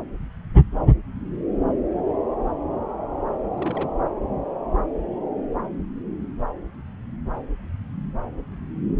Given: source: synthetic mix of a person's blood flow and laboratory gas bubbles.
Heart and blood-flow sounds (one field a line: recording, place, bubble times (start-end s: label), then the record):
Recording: Doppler ultrasound of blood flow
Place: subclavian vein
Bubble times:
3.54-3.92 s: bubbles
From the record:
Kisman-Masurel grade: 211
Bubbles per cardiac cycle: several, 3 to 8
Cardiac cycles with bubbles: 1 to 10%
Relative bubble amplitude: barely perceptible (0.100 to 0.250)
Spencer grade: 1 (occasional bubble signal discernible with the cardiac motion signal, with majority of cardiac periods free of bubbles)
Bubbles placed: anywhere in the cardiac cycle